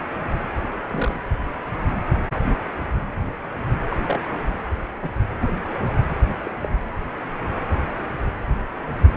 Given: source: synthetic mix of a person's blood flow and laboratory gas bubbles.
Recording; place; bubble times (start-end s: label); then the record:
Doppler ultrasound of blood flow; precordium
0.88-1.19 s: bubbles
2.33-2.40 s: bubbles
3.90-3.97 s: bubbles
4.06-4.20 s: bubbles
5.01-5.09 s: bubbles
5.41-5.51 s: bubbles
6.43-6.51 s: bubbles
6.63-6.68 s: bubbles
From the record:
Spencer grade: 2 (many but less than half of the cardiac periods contain bubble signals, singularly or in groups); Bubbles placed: anywhere in the cardiac cycle